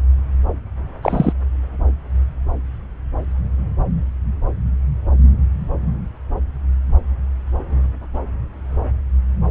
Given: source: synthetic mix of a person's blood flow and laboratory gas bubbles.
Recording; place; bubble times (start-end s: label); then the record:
Doppler ultrasound of blood flow; subclavian vein
1.02-1.33 s: bubbles
From the record:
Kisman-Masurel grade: 113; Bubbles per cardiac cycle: 1 to 2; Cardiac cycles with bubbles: 1 to 10%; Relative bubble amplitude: loud (0.450 to 0.775); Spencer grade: 1 (occasional bubble signal discernible with the cardiac motion signal, with majority of cardiac periods free of bubbles); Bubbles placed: anywhere in the cardiac cycle